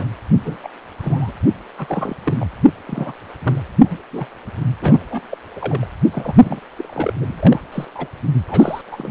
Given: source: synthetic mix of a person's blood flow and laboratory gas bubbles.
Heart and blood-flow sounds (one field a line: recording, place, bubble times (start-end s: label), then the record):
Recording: Doppler ultrasound of blood flow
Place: precordium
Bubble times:
0.00-0.04 s: bubbles
0.44-0.56 s: bubbles
0.63-0.68 s: bubbles
0.98-1.33 s: bubbles
1.77-2.16 s: bubbles
2.24-2.46 s: bubbles
2.87-3.12 s: bubbles
3.42-3.64 s: bubbles
3.85-3.98 s: bubbles
4.11-4.27 s: bubbles
4.82-5.38 s: bubbles
5.56-5.85 s: bubbles
6.12-6.36 s: bubbles
6.42-6.61 s: bubbles
6.76-7.13 s: bubbles
7.21-7.63 s: bubbles
7.72-7.85 s: bubbles
7.94-8.08 s: bubbles
8.48-8.81 s: bubbles
8.91-9.11 s: bubbles
From the record:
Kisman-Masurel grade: 242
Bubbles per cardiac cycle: several, 3 to 8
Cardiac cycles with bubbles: 100%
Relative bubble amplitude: moderate (0.250 to 0.450)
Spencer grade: 3 (all of the cardiac periods contain showers or single bubble signals, but not dominating or overriding the cardiac motion signals)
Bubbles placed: anywhere in the cardiac cycle